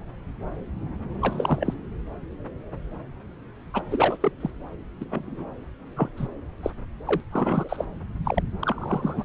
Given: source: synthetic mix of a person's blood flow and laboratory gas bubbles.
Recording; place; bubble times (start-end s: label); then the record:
Doppler ultrasound of blood flow; subclavian vein
1.21-1.74 s: bubbles
3.73-3.84 s: bubbles
3.90-4.17 s: bubbles
4.21-4.32 s: bubbles
4.40-4.50 s: bubbles
5.00-5.04 s: bubbles
5.10-5.45 s: bubbles
5.96-6.09 s: bubbles
6.17-6.27 s: bubbles
6.63-6.71 s: bubbles
7.05-7.21 s: bubbles
7.31-7.84 s: bubbles
8.24-8.42 s: bubbles
8.62-9.24 s: bubbles
From the record:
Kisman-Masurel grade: 232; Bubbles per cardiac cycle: several, 3 to 8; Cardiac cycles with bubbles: 50 to 99%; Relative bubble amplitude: moderate (0.250 to 0.450); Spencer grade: 3 (all of the cardiac periods contain showers or single bubble signals, but not dominating or overriding the cardiac motion signals); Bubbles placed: anywhere in the cardiac cycle